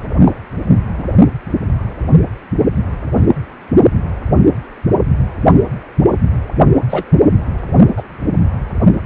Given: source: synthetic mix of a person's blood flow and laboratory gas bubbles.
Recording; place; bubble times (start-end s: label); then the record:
Doppler ultrasound of blood flow; precordium
0.25-0.33 s: bubbles
0.98-1.04 s: bubbles
3.14-3.26 s: bubbles
6.89-7.04 s: bubbles
7.96-8.03 s: bubbles
From the record:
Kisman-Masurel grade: 123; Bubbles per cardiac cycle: 1 to 2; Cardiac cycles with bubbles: 10 to 50%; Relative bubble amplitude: loud (0.450 to 0.775); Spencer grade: 2 (many but less than half of the cardiac periods contain bubble signals, singularly or in groups); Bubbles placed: only in the low amplitude regions of the cardiac cycle